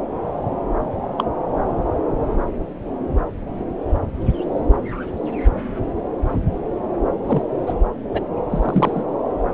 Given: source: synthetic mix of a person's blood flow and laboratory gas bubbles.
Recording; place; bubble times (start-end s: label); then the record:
Doppler ultrasound of blood flow; subclavian vein
1.18-1.24 s: bubbles
7.25-7.42 s: bubbles
7.67-7.74 s: bubbles
8.13-8.21 s: bubbles
8.50-9.03 s: bubbles
From the record:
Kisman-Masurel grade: 122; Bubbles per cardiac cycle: 1 to 2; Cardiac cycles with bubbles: 10 to 50%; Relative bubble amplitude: moderate (0.250 to 0.450); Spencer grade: 2 (many but less than half of the cardiac periods contain bubble signals, singularly or in groups); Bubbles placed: anywhere in the cardiac cycle